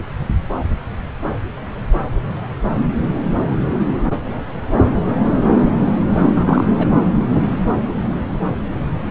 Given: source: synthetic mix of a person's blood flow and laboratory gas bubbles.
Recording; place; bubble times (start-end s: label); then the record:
Doppler ultrasound of blood flow; subclavian vein
6.36-6.64 s: bubbles
6.78-6.87 s: bubbles
From the record:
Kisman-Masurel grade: 212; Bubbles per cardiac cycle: several, 3 to 8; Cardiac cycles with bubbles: 1 to 10%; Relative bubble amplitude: moderate (0.250 to 0.450); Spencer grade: 1 (occasional bubble signal discernible with the cardiac motion signal, with majority of cardiac periods free of bubbles); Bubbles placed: anywhere in the cardiac cycle